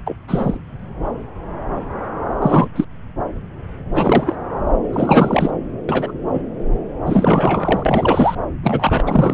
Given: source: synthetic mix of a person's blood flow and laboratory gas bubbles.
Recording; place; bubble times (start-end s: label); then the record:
Doppler ultrasound of blood flow; subclavian vein
0.07-0.15 s: bubbles
0.27-0.58 s: bubbles
2.42-2.68 s: bubbles
2.75-2.85 s: bubbles
3.94-4.36 s: bubbles
4.92-5.50 s: bubbles
5.88-6.12 s: bubbles
6.33-6.42 s: bubbles
7.05-8.35 s: bubbles
8.63-9.04 s: bubbles
9.06-9.33 s: bubbles
From the record:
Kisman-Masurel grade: 233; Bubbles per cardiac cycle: several, 3 to 8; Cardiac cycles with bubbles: 50 to 99%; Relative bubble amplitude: loud (0.450 to 0.775); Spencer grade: 3 (all of the cardiac periods contain showers or single bubble signals, but not dominating or overriding the cardiac motion signals); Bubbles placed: anywhere in the cardiac cycle